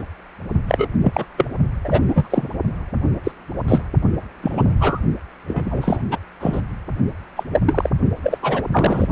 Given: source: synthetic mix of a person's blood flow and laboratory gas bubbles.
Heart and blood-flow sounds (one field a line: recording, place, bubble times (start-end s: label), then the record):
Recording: Doppler ultrasound of blood flow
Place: precordium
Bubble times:
0.00-0.02 s: bubbles
0.67-0.88 s: bubbles
1.03-1.25 s: bubbles
1.37-1.46 s: bubbles
1.84-2.03 s: bubbles
2.08-2.27 s: bubbles
2.30-2.50 s: bubbles
3.24-3.31 s: bubbles
3.68-3.82 s: bubbles
4.42-4.75 s: bubbles
4.79-5.01 s: bubbles
5.48-6.02 s: bubbles
6.11-6.19 s: bubbles
6.40-6.61 s: bubbles
7.36-7.44 s: bubbles
7.53-7.61 s: bubbles
7.66-7.90 s: bubbles
8.23-8.38 s: bubbles
8.41-8.63 s: bubbles
8.71-9.07 s: bubbles
From the record:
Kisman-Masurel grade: 243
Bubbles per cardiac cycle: several, 3 to 8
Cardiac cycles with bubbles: 100%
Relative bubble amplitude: loud (0.450 to 0.775)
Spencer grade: 3 (all of the cardiac periods contain showers or single bubble signals, but not dominating or overriding the cardiac motion signals)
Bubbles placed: only in the low amplitude regions of the cardiac cycle